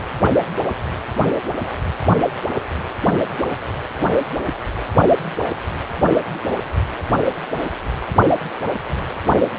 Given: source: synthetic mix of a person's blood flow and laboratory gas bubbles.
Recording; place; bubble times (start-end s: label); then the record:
Doppler ultrasound of blood flow; precordium
no bubbles
From the record:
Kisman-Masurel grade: 000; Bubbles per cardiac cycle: 0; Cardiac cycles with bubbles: 0%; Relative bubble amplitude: no bubbles discernible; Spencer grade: 0 (complete lack of bubble signals)